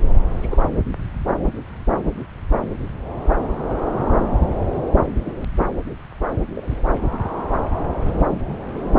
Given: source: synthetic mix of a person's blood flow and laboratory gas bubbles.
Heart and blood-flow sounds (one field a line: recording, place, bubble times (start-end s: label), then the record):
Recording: Doppler ultrasound of blood flow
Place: subclavian vein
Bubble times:
0.31-0.65 s: bubbles
4.47-4.55 s: bubbles
4.76-4.83 s: bubbles
5.25-5.33 s: bubbles
6.54-6.64 s: bubbles
6.67-6.75 s: bubbles
8.07-8.19 s: bubbles
From the record:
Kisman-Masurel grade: 121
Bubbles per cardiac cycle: 1 to 2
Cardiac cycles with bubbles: 10 to 50%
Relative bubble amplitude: barely perceptible (0.100 to 0.250)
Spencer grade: 2 (many but less than half of the cardiac periods contain bubble signals, singularly or in groups)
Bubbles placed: anywhere in the cardiac cycle